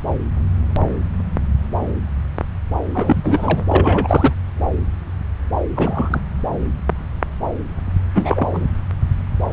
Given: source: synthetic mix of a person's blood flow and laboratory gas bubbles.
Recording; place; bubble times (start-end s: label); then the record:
Doppler ultrasound of blood flow; subclavian vein
2.94-3.63 s: bubbles
3.69-4.34 s: bubbles
5.75-6.20 s: bubbles
8.14-8.47 s: bubbles
8.53-8.67 s: bubbles
From the record:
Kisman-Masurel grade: 222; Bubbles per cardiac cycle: several, 3 to 8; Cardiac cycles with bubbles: 10 to 50%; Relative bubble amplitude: moderate (0.250 to 0.450); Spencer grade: 2 (many but less than half of the cardiac periods contain bubble signals, singularly or in groups); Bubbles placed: anywhere in the cardiac cycle